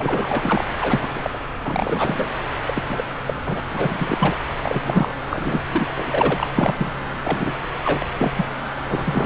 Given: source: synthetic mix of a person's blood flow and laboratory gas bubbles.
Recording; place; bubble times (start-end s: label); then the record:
Doppler ultrasound of blood flow; subclavian vein
0.00-0.65 s: bubbles
0.81-1.08 s: bubbles
1.15-1.30 s: bubbles
1.33-1.38 s: bubbles
1.65-2.33 s: bubbles
2.65-2.83 s: bubbles
2.88-3.04 s: bubbles
3.26-3.34 s: bubbles
3.46-3.60 s: bubbles
3.69-4.37 s: bubbles
4.62-5.15 s: bubbles
5.29-5.62 s: bubbles
5.73-5.94 s: bubbles
5.97-6.47 s: bubbles
6.54-6.90 s: bubbles
7.23-7.67 s: bubbles
7.84-8.09 s: bubbles
8.18-8.31 s: bubbles
8.37-8.48 s: bubbles
8.89-9.26 s: bubbles
From the record:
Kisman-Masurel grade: 342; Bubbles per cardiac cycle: rolling drumbeat, 9 or more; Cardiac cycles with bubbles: 100%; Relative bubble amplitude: moderate (0.250 to 0.450); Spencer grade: 3 (all of the cardiac periods contain showers or single bubble signals, but not dominating or overriding the cardiac motion signals); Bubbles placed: anywhere in the cardiac cycle